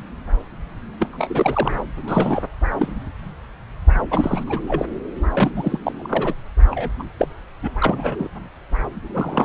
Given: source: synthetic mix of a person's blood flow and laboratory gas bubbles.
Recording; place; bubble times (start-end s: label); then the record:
Doppler ultrasound of blood flow; subclavian vein
0.99-1.82 s: bubbles
2.04-2.43 s: bubbles
2.79-2.93 s: bubbles
4.11-4.44 s: bubbles
4.47-4.61 s: bubbles
4.68-4.86 s: bubbles
5.31-5.79 s: bubbles
5.83-5.92 s: bubbles
5.98-6.34 s: bubbles
6.71-6.90 s: bubbles
6.99-7.03 s: bubbles
7.19-7.27 s: bubbles
7.62-7.71 s: bubbles
7.79-8.29 s: bubbles
9.14-9.45 s: bubbles
From the record:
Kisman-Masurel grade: 332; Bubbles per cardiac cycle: rolling drumbeat, 9 or more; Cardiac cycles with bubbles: 50 to 99%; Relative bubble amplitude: moderate (0.250 to 0.450); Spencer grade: 3 (all of the cardiac periods contain showers or single bubble signals, but not dominating or overriding the cardiac motion signals); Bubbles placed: anywhere in the cardiac cycle